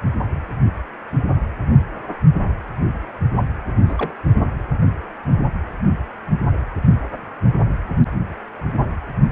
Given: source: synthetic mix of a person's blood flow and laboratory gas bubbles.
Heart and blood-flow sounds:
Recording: Doppler ultrasound of blood flow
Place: precordium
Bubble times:
3.86-4.13 s: bubbles
From the record:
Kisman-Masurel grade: 111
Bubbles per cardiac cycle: 1 to 2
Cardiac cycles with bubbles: 1 to 10%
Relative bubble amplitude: barely perceptible (0.100 to 0.250)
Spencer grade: 1 (occasional bubble signal discernible with the cardiac motion signal, with majority of cardiac periods free of bubbles)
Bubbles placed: only in the low amplitude regions of the cardiac cycle

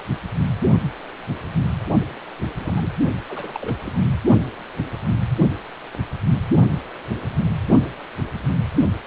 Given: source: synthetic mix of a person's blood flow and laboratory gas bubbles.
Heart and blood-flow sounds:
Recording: Doppler ultrasound of blood flow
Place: precordium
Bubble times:
2.60-2.91 s: bubbles
3.29-3.76 s: bubbles
3.78-3.98 s: bubbles
From the record:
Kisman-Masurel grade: 221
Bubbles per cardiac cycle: several, 3 to 8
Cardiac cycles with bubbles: 10 to 50%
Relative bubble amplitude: barely perceptible (0.100 to 0.250)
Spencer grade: 2 (many but less than half of the cardiac periods contain bubble signals, singularly or in groups)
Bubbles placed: only in the low amplitude regions of the cardiac cycle

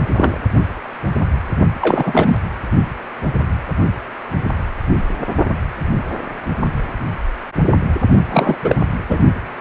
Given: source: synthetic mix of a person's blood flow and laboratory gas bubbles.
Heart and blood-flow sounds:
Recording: Doppler ultrasound of blood flow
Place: precordium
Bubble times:
0.00-0.03 s: bubbles
0.14-0.39 s: bubbles
1.81-2.37 s: bubbles
8.30-8.55 s: bubbles
8.63-8.76 s: bubbles
9.08-9.20 s: bubbles
From the record:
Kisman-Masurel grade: 223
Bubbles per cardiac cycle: several, 3 to 8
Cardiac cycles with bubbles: 10 to 50%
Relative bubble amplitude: loud (0.450 to 0.775)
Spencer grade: 2 (many but less than half of the cardiac periods contain bubble signals, singularly or in groups)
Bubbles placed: only in the low amplitude regions of the cardiac cycle

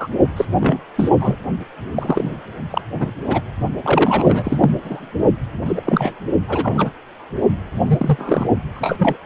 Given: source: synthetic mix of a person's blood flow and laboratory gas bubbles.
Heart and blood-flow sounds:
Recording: Doppler ultrasound of blood flow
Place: precordium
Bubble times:
0.00-0.08 s: bubbles
0.36-0.45 s: bubbles
0.59-0.78 s: bubbles
0.96-1.09 s: bubbles
1.19-1.35 s: bubbles
1.95-2.38 s: bubbles
2.70-2.81 s: bubbles
2.92-3.11 s: bubbles
3.27-3.42 s: bubbles
3.83-4.71 s: bubbles
4.84-5.09 s: bubbles
5.66-5.81 s: bubbles
5.84-6.16 s: bubbles
6.47-6.91 s: bubbles
7.87-8.47 s: bubbles
8.74-9.17 s: bubbles
From the record:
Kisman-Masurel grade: 243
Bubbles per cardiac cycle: several, 3 to 8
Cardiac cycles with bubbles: 100%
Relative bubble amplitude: loud (0.450 to 0.775)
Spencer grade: 3 (all of the cardiac periods contain showers or single bubble signals, but not dominating or overriding the cardiac motion signals)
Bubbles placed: only in the low amplitude regions of the cardiac cycle

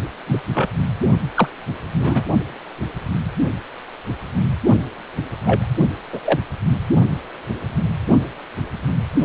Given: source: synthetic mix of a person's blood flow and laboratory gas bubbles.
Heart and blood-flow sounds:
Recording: Doppler ultrasound of blood flow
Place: precordium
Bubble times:
0.27-0.42 s: bubbles
0.53-0.69 s: bubbles
1.34-1.48 s: bubbles
1.99-2.23 s: bubbles
5.44-5.68 s: bubbles
6.12-6.20 s: bubbles
6.25-6.40 s: bubbles
From the record:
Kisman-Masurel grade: 123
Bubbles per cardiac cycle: 1 to 2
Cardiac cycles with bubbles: 10 to 50%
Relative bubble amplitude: loud (0.450 to 0.775)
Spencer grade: 2 (many but less than half of the cardiac periods contain bubble signals, singularly or in groups)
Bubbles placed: only in the low amplitude regions of the cardiac cycle

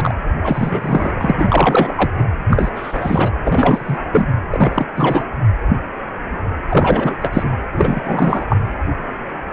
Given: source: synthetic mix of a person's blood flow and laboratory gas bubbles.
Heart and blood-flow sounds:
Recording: Doppler ultrasound of blood flow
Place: precordium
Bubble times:
0.00-0.15 s: bubbles
0.42-1.10 s: bubbles
1.15-1.35 s: bubbles
1.38-2.12 s: bubbles
2.17-2.25 s: bubbles
2.50-2.71 s: bubbles
2.75-3.31 s: bubbles
3.44-3.98 s: bubbles
4.12-4.28 s: bubbles
4.51-4.86 s: bubbles
4.96-5.24 s: bubbles
6.70-7.16 s: bubbles
7.21-7.52 s: bubbles
7.72-8.45 s: bubbles
8.48-8.57 s: bubbles
From the record:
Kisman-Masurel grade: 333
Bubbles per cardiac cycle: rolling drumbeat, 9 or more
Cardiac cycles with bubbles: 50 to 99%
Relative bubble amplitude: loud (0.450 to 0.775)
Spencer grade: 3 (all of the cardiac periods contain showers or single bubble signals, but not dominating or overriding the cardiac motion signals)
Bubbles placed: anywhere in the cardiac cycle

